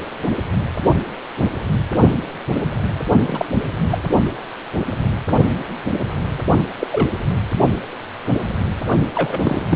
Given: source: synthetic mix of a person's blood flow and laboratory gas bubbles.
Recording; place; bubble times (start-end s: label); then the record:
Doppler ultrasound of blood flow; precordium
3.27-3.44 s: bubbles
3.91-3.99 s: bubbles
6.79-6.88 s: bubbles
6.92-7.11 s: bubbles
9.15-9.65 s: bubbles
9.69-9.76 s: bubbles
From the record:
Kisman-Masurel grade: 222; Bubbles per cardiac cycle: several, 3 to 8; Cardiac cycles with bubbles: 10 to 50%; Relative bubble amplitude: moderate (0.250 to 0.450); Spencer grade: 2 (many but less than half of the cardiac periods contain bubble signals, singularly or in groups); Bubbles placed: only in the low amplitude regions of the cardiac cycle